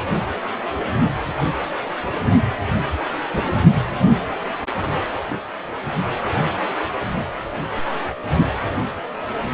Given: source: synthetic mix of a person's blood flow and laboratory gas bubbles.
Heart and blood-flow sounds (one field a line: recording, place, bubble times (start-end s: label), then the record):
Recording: Doppler ultrasound of blood flow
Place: precordium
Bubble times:
3.33-3.47 s: bubbles
From the record:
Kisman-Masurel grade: 112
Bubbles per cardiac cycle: 1 to 2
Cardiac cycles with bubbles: 1 to 10%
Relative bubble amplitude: moderate (0.250 to 0.450)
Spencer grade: 1 (occasional bubble signal discernible with the cardiac motion signal, with majority of cardiac periods free of bubbles)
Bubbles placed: anywhere in the cardiac cycle